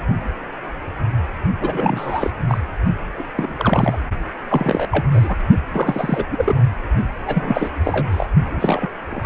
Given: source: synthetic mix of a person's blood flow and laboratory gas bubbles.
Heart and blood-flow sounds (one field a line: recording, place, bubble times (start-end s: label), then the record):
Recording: Doppler ultrasound of blood flow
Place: precordium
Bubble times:
1.60-2.31 s: bubbles
2.48-2.58 s: bubbles
3.19-3.24 s: bubbles
3.36-3.97 s: bubbles
4.48-4.87 s: bubbles
4.91-5.05 s: bubbles
5.10-5.36 s: bubbles
5.68-6.24 s: bubbles
6.31-6.55 s: bubbles
7.25-7.73 s: bubbles
7.83-8.27 s: bubbles
8.44-8.88 s: bubbles
9.11-9.26 s: bubbles
From the record:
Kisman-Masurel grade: 332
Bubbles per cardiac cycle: rolling drumbeat, 9 or more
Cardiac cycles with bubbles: 50 to 99%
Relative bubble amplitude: moderate (0.250 to 0.450)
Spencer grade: 3 (all of the cardiac periods contain showers or single bubble signals, but not dominating or overriding the cardiac motion signals)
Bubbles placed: only in the low amplitude regions of the cardiac cycle